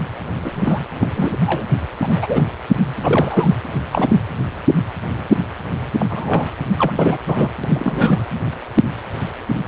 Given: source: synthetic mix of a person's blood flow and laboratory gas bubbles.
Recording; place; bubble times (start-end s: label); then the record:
Doppler ultrasound of blood flow; precordium
0.43-0.82 s: bubbles
1.00-1.08 s: bubbles
1.17-1.37 s: bubbles
1.46-1.65 s: bubbles
1.99-2.44 s: bubbles
3.01-3.56 s: bubbles
3.92-4.17 s: bubbles
5.99-6.06 s: bubbles
6.09-6.49 s: bubbles
6.78-6.92 s: bubbles
6.97-7.18 s: bubbles
7.25-7.49 s: bubbles
7.63-8.27 s: bubbles
From the record:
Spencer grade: 3 (all of the cardiac periods contain showers or single bubble signals, but not dominating or overriding the cardiac motion signals); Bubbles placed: anywhere in the cardiac cycle